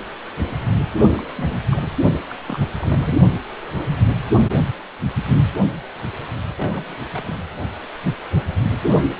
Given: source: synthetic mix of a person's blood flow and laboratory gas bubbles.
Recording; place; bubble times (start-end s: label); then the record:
Doppler ultrasound of blood flow; precordium
1.15-1.22 s: bubbles
1.36-1.90 s: bubbles
2.29-2.35 s: bubbles
2.46-2.68 s: bubbles
2.79-3.16 s: bubbles
6.57-6.96 s: bubbles
7.12-7.36 s: bubbles
From the record:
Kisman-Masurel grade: 221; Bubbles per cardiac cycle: several, 3 to 8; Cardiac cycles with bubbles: 10 to 50%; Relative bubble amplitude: barely perceptible (0.100 to 0.250); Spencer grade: 2 (many but less than half of the cardiac periods contain bubble signals, singularly or in groups); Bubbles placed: only in the low amplitude regions of the cardiac cycle